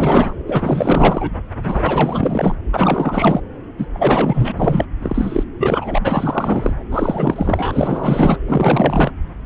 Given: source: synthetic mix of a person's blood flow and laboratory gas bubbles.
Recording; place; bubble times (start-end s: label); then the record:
Doppler ultrasound of blood flow; subclavian vein
0.00-0.33 s: bubbles
0.46-1.30 s: bubbles
1.63-2.55 s: bubbles
2.73-3.41 s: bubbles
3.77-3.86 s: bubbles
3.93-4.86 s: bubbles
5.01-5.44 s: bubbles
5.57-6.74 s: bubbles
6.91-8.38 s: bubbles
8.46-9.12 s: bubbles
From the record:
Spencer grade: 4 (maximum detectable bubble signal sounding continuously throughout systole and diastole of every cardiac period, and overriding the amplitude of the normal cardiac signals); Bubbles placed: anywhere in the cardiac cycle